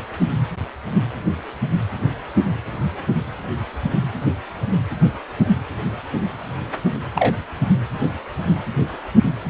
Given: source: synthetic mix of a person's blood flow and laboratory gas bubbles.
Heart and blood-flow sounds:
Doppler ultrasound of blood flow; precordium
7.15-7.34 s: bubbles
From the record:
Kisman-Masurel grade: 113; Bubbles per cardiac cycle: 1 to 2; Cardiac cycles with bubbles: 1 to 10%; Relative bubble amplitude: loud (0.450 to 0.775); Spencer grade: 1 (occasional bubble signal discernible with the cardiac motion signal, with majority of cardiac periods free of bubbles); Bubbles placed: anywhere in the cardiac cycle

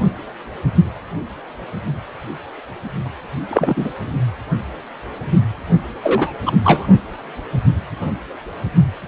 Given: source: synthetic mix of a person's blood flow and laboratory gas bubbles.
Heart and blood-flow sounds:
Doppler ultrasound of blood flow; precordium
3.50-3.92 s: bubbles
6.02-6.32 s: bubbles
6.45-6.53 s: bubbles
6.64-6.86 s: bubbles
From the record:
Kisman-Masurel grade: 223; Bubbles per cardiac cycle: several, 3 to 8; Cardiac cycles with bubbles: 10 to 50%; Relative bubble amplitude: loud (0.450 to 0.775); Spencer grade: 2 (many but less than half of the cardiac periods contain bubble signals, singularly or in groups); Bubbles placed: only in the low amplitude regions of the cardiac cycle

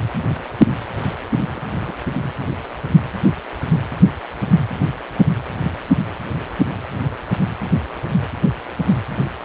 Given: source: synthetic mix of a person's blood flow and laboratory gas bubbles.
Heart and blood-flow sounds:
Doppler ultrasound of blood flow; precordium
1.47-1.95 s: bubbles
From the record:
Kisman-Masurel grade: 111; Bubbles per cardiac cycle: 1 to 2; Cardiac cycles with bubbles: 1 to 10%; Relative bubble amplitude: barely perceptible (0.100 to 0.250); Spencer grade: 1 (occasional bubble signal discernible with the cardiac motion signal, with majority of cardiac periods free of bubbles); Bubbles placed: anywhere in the cardiac cycle

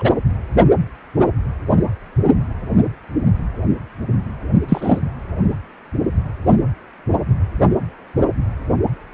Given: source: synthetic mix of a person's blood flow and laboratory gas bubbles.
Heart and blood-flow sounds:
Doppler ultrasound of blood flow; precordium
0.00-0.10 s: bubbles
4.68-5.00 s: bubbles
From the record:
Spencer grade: 2 (many but less than half of the cardiac periods contain bubble signals, singularly or in groups); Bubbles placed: anywhere in the cardiac cycle

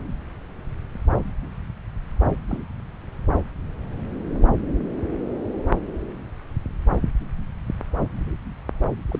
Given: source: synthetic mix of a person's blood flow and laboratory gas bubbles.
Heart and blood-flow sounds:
Doppler ultrasound of blood flow; subclavian vein
2.49-2.58 s: bubbles
9.10-9.19 s: bubbles
From the record:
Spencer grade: 2 (many but less than half of the cardiac periods contain bubble signals, singularly or in groups); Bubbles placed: anywhere in the cardiac cycle

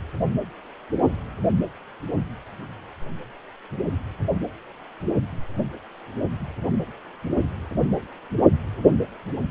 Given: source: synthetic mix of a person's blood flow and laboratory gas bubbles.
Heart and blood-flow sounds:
Doppler ultrasound of blood flow; precordium
no bubbles
From the record:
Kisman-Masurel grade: 000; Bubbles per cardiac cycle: 0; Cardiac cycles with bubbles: 0%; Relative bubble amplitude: no bubbles discernible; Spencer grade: 0 (complete lack of bubble signals)

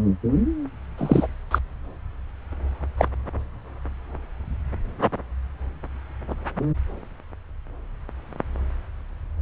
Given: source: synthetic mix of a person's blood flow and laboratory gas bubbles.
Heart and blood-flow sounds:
Doppler ultrasound of blood flow; subclavian vein
0.97-1.27 s: bubbles
1.51-1.58 s: bubbles
2.98-3.08 s: bubbles
From the record:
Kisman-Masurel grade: 123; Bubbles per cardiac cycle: 1 to 2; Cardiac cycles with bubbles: 10 to 50%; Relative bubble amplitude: loud (0.450 to 0.775); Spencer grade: 2 (many but less than half of the cardiac periods contain bubble signals, singularly or in groups); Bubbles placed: anywhere in the cardiac cycle

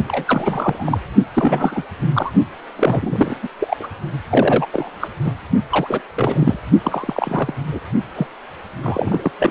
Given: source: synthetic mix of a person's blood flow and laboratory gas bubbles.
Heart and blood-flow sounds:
Doppler ultrasound of blood flow; precordium
0.08-0.98 s: bubbles
1.33-1.83 s: bubbles
2.01-2.09 s: bubbles
2.15-2.32 s: bubbles
2.76-3.38 s: bubbles
3.42-3.48 s: bubbles
3.58-3.77 s: bubbles
3.79-3.87 s: bubbles
4.29-4.67 s: bubbles
4.73-4.89 s: bubbles
5.00-5.08 s: bubbles
5.24-5.33 s: bubbles
5.70-6.01 s: bubbles
6.16-6.59 s: bubbles
6.83-7.54 s: bubbles
7.67-7.79 s: bubbles
8.15-8.27 s: bubbles
8.82-9.31 s: bubbles
9.39-9.51 s: bubbles
From the record:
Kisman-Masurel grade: 342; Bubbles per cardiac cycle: rolling drumbeat, 9 or more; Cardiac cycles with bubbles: 100%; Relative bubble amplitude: moderate (0.250 to 0.450); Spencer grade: 3 (all of the cardiac periods contain showers or single bubble signals, but not dominating or overriding the cardiac motion signals); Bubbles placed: only in the low amplitude regions of the cardiac cycle

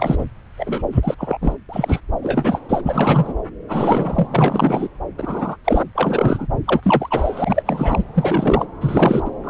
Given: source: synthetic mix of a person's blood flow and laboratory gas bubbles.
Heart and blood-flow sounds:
Doppler ultrasound of blood flow; subclavian vein
0.00-0.25 s: bubbles
0.57-0.82 s: bubbles
0.92-1.00 s: bubbles
1.02-1.15 s: bubbles
1.18-1.38 s: bubbles
1.41-1.56 s: bubbles
1.69-2.00 s: bubbles
2.22-2.60 s: bubbles
2.69-2.81 s: bubbles
2.85-3.33 s: bubbles
3.69-4.27 s: bubbles
4.30-4.88 s: bubbles
5.17-5.56 s: bubbles
5.64-5.83 s: bubbles
5.95-6.47 s: bubbles
6.67-7.62 s: bubbles
7.65-8.04 s: bubbles
8.14-8.66 s: bubbles
8.81-9.22 s: bubbles
9.25-9.29 s: bubbles
9.44-9.50 s: bubbles
From the record:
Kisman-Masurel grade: 342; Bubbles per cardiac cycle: rolling drumbeat, 9 or more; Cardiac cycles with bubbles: 100%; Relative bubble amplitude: moderate (0.250 to 0.450); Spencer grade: 3 (all of the cardiac periods contain showers or single bubble signals, but not dominating or overriding the cardiac motion signals); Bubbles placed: anywhere in the cardiac cycle

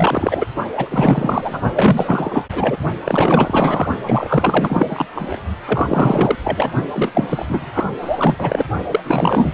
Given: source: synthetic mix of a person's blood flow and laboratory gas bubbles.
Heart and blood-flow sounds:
Doppler ultrasound of blood flow; precordium
0.00-0.45 s: bubbles
0.76-1.62 s: bubbles
1.72-2.46 s: bubbles
2.52-2.77 s: bubbles
3.04-3.87 s: bubbles
4.05-5.05 s: bubbles
5.14-5.41 s: bubbles
5.66-6.35 s: bubbles
6.43-6.71 s: bubbles
6.93-7.46 s: bubbles
7.48-7.71 s: bubbles
7.74-7.85 s: bubbles
8.01-8.68 s: bubbles
8.91-9.00 s: bubbles
9.04-9.54 s: bubbles
From the record:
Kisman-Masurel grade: 444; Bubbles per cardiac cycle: continuous sound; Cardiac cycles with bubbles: 100%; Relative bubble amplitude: maximal (0.775 to 0.999); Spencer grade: 4 (maximum detectable bubble signal sounding continuously throughout systole and diastole of every cardiac period, and overriding the amplitude of the normal cardiac signals); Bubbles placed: only in the low amplitude regions of the cardiac cycle

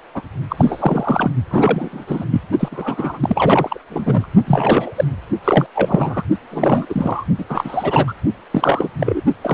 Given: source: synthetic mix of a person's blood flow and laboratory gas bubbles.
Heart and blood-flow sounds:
Doppler ultrasound of blood flow; precordium
0.14-0.22 s: bubbles
0.49-1.31 s: bubbles
1.50-2.25 s: bubbles
2.30-2.42 s: bubbles
2.59-3.79 s: bubbles
3.90-4.27 s: bubbles
4.46-5.04 s: bubbles
5.44-5.67 s: bubbles
5.75-6.22 s: bubbles
6.51-6.86 s: bubbles
6.89-7.24 s: bubbles
7.38-7.45 s: bubbles
7.49-8.13 s: bubbles
8.51-8.89 s: bubbles
9.00-9.21 s: bubbles
9.41-9.54 s: bubbles
From the record:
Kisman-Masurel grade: 343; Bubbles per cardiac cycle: rolling drumbeat, 9 or more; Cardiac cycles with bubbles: 100%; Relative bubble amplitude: loud (0.450 to 0.775); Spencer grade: 3 (all of the cardiac periods contain showers or single bubble signals, but not dominating or overriding the cardiac motion signals); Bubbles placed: only in the low amplitude regions of the cardiac cycle

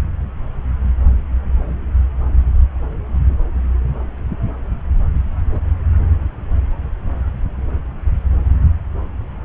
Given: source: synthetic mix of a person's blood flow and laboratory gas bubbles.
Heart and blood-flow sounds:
Doppler ultrasound of blood flow; subclavian vein
5.50-5.60 s: bubbles
From the record:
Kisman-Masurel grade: 111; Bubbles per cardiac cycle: 1 to 2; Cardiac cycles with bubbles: 1 to 10%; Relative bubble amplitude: barely perceptible (0.100 to 0.250); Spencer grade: 1 (occasional bubble signal discernible with the cardiac motion signal, with majority of cardiac periods free of bubbles); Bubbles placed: anywhere in the cardiac cycle

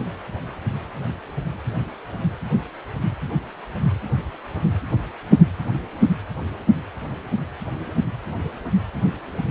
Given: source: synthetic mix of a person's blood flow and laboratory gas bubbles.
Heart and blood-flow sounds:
Doppler ultrasound of blood flow; precordium
no bubbles
From the record:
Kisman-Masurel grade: 000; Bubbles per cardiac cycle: 0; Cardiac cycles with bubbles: 0%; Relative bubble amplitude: no bubbles discernible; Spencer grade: 0 (complete lack of bubble signals)

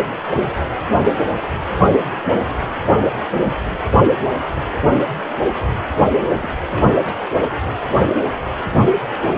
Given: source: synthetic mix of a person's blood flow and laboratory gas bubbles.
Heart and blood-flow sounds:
Doppler ultrasound of blood flow; precordium
6.42-6.49 s: bubbles
6.70-6.96 s: bubbles
7.04-7.21 s: bubbles
From the record:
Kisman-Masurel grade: 211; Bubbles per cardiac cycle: several, 3 to 8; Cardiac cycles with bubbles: 1 to 10%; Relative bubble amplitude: barely perceptible (0.100 to 0.250); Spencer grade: 1 (occasional bubble signal discernible with the cardiac motion signal, with majority of cardiac periods free of bubbles); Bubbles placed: only in the low amplitude regions of the cardiac cycle

